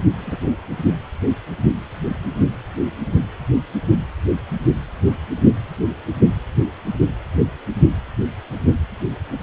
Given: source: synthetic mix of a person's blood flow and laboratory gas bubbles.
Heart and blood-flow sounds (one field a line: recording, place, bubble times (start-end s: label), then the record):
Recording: Doppler ultrasound of blood flow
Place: precordium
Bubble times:
0.11-0.41 s: bubbles
From the record:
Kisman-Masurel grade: 112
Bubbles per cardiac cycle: 1 to 2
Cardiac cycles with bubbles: 1 to 10%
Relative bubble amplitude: moderate (0.250 to 0.450)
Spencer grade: 1 (occasional bubble signal discernible with the cardiac motion signal, with majority of cardiac periods free of bubbles)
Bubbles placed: anywhere in the cardiac cycle